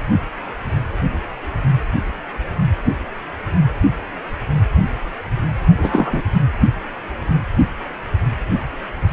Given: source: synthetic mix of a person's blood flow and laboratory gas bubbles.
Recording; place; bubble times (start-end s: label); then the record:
Doppler ultrasound of blood flow; precordium
5.77-6.21 s: bubbles
From the record:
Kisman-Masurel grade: 213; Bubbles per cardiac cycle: several, 3 to 8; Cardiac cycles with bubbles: 1 to 10%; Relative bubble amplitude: loud (0.450 to 0.775); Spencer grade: 1 (occasional bubble signal discernible with the cardiac motion signal, with majority of cardiac periods free of bubbles); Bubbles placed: anywhere in the cardiac cycle